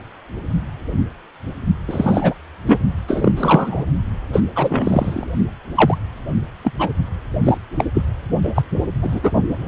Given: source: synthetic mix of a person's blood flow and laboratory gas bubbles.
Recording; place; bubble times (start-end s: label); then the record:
Doppler ultrasound of blood flow; precordium
1.88-2.34 s: bubbles
2.67-2.79 s: bubbles
3.08-3.32 s: bubbles
3.37-3.84 s: bubbles
4.33-4.41 s: bubbles
4.55-5.26 s: bubbles
5.75-5.97 s: bubbles
6.64-6.72 s: bubbles
6.79-6.89 s: bubbles
7.43-7.58 s: bubbles
7.78-7.85 s: bubbles
7.93-8.02 s: bubbles
8.43-8.62 s: bubbles
9.02-9.32 s: bubbles
From the record:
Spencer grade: 3 (all of the cardiac periods contain showers or single bubble signals, but not dominating or overriding the cardiac motion signals); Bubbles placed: only in the low amplitude regions of the cardiac cycle